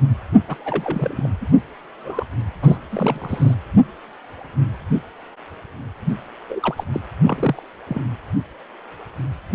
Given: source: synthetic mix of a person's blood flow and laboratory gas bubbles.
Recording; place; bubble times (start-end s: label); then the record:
Doppler ultrasound of blood flow; precordium
0.48-0.55 s: bubbles
0.59-1.27 s: bubbles
1.41-1.47 s: bubbles
2.04-2.25 s: bubbles
2.62-2.77 s: bubbles
2.89-3.54 s: bubbles
6.49-6.84 s: bubbles
6.92-7.01 s: bubbles
7.23-7.64 s: bubbles
7.88-8.01 s: bubbles
From the record:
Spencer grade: 3 (all of the cardiac periods contain showers or single bubble signals, but not dominating or overriding the cardiac motion signals); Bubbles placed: anywhere in the cardiac cycle